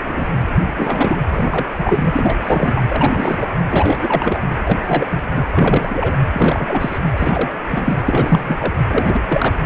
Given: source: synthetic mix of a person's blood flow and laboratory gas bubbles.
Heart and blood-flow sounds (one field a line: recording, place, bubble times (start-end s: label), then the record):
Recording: Doppler ultrasound of blood flow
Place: precordium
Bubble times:
0.00-0.40 s: bubbles
0.62-1.17 s: bubbles
1.28-1.67 s: bubbles
1.77-2.39 s: bubbles
2.42-2.81 s: bubbles
2.88-3.48 s: bubbles
3.70-4.39 s: bubbles
4.65-5.25 s: bubbles
5.31-5.44 s: bubbles
5.54-6.14 s: bubbles
6.32-6.98 s: bubbles
7.17-7.51 s: bubbles
7.71-8.02 s: bubbles
8.04-8.73 s: bubbles
8.89-9.22 s: bubbles
9.28-9.56 s: bubbles
From the record:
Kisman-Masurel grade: 343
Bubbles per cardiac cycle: rolling drumbeat, 9 or more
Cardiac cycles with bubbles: 100%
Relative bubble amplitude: loud (0.450 to 0.775)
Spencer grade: 3 (all of the cardiac periods contain showers or single bubble signals, but not dominating or overriding the cardiac motion signals)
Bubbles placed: anywhere in the cardiac cycle